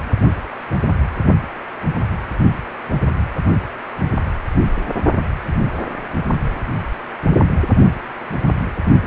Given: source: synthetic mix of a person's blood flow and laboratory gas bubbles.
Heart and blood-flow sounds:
Doppler ultrasound of blood flow; precordium
no bubbles
From the record:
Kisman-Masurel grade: 000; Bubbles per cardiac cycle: 0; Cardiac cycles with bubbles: 0%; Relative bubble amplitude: no bubbles discernible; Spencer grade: 0 (complete lack of bubble signals)

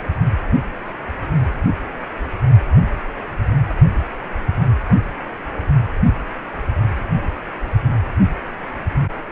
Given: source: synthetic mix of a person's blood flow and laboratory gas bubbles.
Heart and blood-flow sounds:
Doppler ultrasound of blood flow; precordium
0.00-0.03 s: bubbles
From the record:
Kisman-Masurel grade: 213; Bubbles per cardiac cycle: several, 3 to 8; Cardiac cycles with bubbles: 1 to 10%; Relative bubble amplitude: loud (0.450 to 0.775); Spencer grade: 1 (occasional bubble signal discernible with the cardiac motion signal, with majority of cardiac periods free of bubbles); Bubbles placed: only in the low amplitude regions of the cardiac cycle

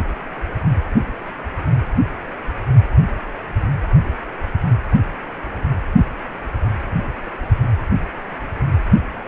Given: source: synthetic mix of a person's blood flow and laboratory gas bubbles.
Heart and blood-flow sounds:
Doppler ultrasound of blood flow; precordium
no bubbles
From the record:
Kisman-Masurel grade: 000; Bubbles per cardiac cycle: 0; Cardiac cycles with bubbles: 0%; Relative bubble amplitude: no bubbles discernible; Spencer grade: 0 (complete lack of bubble signals)

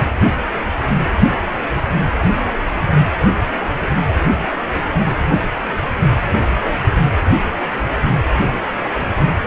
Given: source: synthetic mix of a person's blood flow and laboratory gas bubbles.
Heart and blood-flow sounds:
Doppler ultrasound of blood flow; precordium
no bubbles
From the record:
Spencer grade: 0 (complete lack of bubble signals)

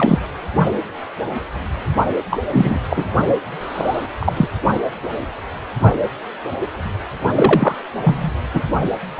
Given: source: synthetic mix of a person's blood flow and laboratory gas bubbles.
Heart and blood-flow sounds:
Doppler ultrasound of blood flow; precordium
0.00-0.19 s: bubbles
2.31-2.40 s: bubbles
2.51-2.80 s: bubbles
2.89-3.05 s: bubbles
3.60-4.06 s: bubbles
4.19-4.32 s: bubbles
4.36-4.48 s: bubbles
7.35-7.75 s: bubbles
8.04-8.30 s: bubbles
8.54-8.63 s: bubbles
9.17-9.20 s: bubbles
From the record:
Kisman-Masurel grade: 233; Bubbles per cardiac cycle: several, 3 to 8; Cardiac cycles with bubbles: 50 to 99%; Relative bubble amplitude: loud (0.450 to 0.775); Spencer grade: 3 (all of the cardiac periods contain showers or single bubble signals, but not dominating or overriding the cardiac motion signals); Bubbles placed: only in the low amplitude regions of the cardiac cycle

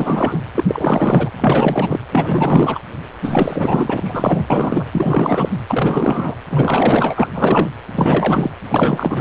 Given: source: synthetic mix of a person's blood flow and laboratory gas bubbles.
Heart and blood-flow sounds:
Doppler ultrasound of blood flow; precordium
0.00-0.39 s: bubbles
0.54-0.64 s: bubbles
0.68-1.30 s: bubbles
1.37-2.00 s: bubbles
2.12-2.79 s: bubbles
3.23-4.46 s: bubbles
4.50-4.87 s: bubbles
4.92-5.50 s: bubbles
5.68-6.35 s: bubbles
6.49-7.28 s: bubbles
7.35-7.70 s: bubbles
7.87-8.50 s: bubbles
8.69-9.21 s: bubbles
From the record:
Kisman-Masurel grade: 444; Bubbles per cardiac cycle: continuous sound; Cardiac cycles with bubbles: 100%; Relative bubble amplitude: maximal (0.775 to 0.999); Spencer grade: 4 (maximum detectable bubble signal sounding continuously throughout systole and diastole of every cardiac period, and overriding the amplitude of the normal cardiac signals); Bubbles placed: anywhere in the cardiac cycle

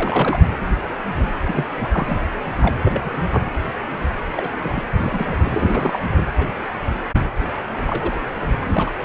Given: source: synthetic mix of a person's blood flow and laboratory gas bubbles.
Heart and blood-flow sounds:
Doppler ultrasound of blood flow; precordium
0.00-0.44 s: bubbles
1.46-1.65 s: bubbles
1.77-2.20 s: bubbles
2.56-2.75 s: bubbles
2.84-3.49 s: bubbles
4.35-4.50 s: bubbles
4.58-4.83 s: bubbles
4.98-5.38 s: bubbles
5.44-6.04 s: bubbles
6.17-6.21 s: bubbles
6.37-6.47 s: bubbles
7.86-8.30 s: bubbles
8.42-8.48 s: bubbles
8.60-8.91 s: bubbles
From the record:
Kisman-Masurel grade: 332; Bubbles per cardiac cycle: rolling drumbeat, 9 or more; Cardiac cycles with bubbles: 50 to 99%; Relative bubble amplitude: moderate (0.250 to 0.450); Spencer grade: 3 (all of the cardiac periods contain showers or single bubble signals, but not dominating or overriding the cardiac motion signals); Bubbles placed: anywhere in the cardiac cycle

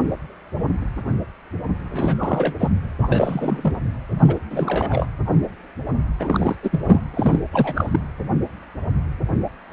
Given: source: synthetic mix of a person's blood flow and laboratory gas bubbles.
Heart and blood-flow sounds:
Doppler ultrasound of blood flow; precordium
1.89-2.56 s: bubbles
2.58-2.70 s: bubbles
3.02-3.79 s: bubbles
4.18-4.36 s: bubbles
4.50-5.08 s: bubbles
6.19-6.55 s: bubbles
6.62-6.80 s: bubbles
6.87-7.03 s: bubbles
7.13-7.39 s: bubbles
7.52-8.00 s: bubbles
From the record:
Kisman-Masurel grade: 333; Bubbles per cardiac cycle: rolling drumbeat, 9 or more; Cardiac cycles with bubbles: 50 to 99%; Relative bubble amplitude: loud (0.450 to 0.775); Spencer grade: 3 (all of the cardiac periods contain showers or single bubble signals, but not dominating or overriding the cardiac motion signals); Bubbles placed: anywhere in the cardiac cycle

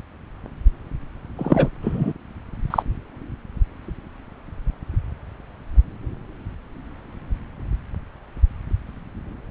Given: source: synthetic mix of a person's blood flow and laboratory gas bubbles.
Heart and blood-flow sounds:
Doppler ultrasound of blood flow; subclavian vein
1.38-1.69 s: bubbles
1.81-2.13 s: bubbles
2.70-2.83 s: bubbles
From the record:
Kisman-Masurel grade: 223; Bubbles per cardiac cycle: several, 3 to 8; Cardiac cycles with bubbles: 10 to 50%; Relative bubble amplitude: loud (0.450 to 0.775); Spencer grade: 2 (many but less than half of the cardiac periods contain bubble signals, singularly or in groups); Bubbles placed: anywhere in the cardiac cycle

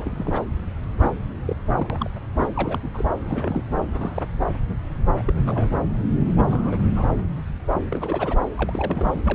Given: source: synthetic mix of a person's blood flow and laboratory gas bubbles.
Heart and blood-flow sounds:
Doppler ultrasound of blood flow; subclavian vein
0.00-0.46 s: bubbles
0.99-1.10 s: bubbles
1.45-1.56 s: bubbles
1.66-2.10 s: bubbles
2.33-2.49 s: bubbles
2.54-2.79 s: bubbles
2.83-2.88 s: bubbles
2.94-3.05 s: bubbles
3.14-3.62 s: bubbles
3.91-4.22 s: bubbles
5.17-5.22 s: bubbles
5.25-5.33 s: bubbles
5.41-5.79 s: bubbles
6.36-6.88 s: bubbles
6.96-7.12 s: bubbles
7.90-8.36 s: bubbles
8.55-9.35 s: bubbles
From the record:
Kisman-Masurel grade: 232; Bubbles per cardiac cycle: several, 3 to 8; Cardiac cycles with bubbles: 50 to 99%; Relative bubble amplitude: moderate (0.250 to 0.450); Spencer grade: 3 (all of the cardiac periods contain showers or single bubble signals, but not dominating or overriding the cardiac motion signals); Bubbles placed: anywhere in the cardiac cycle

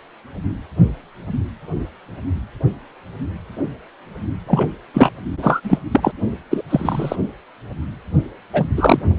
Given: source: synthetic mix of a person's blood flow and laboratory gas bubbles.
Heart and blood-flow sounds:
Doppler ultrasound of blood flow; precordium
4.46-4.67 s: bubbles
4.93-5.09 s: bubbles
5.42-5.60 s: bubbles
5.63-5.79 s: bubbles
5.91-6.12 s: bubbles
6.50-6.62 s: bubbles
6.69-7.16 s: bubbles
8.53-8.66 s: bubbles
8.77-9.00 s: bubbles
From the record:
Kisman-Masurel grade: 233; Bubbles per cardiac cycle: several, 3 to 8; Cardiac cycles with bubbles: 50 to 99%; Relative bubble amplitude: loud (0.450 to 0.775); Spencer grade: 3 (all of the cardiac periods contain showers or single bubble signals, but not dominating or overriding the cardiac motion signals); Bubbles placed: only in the low amplitude regions of the cardiac cycle

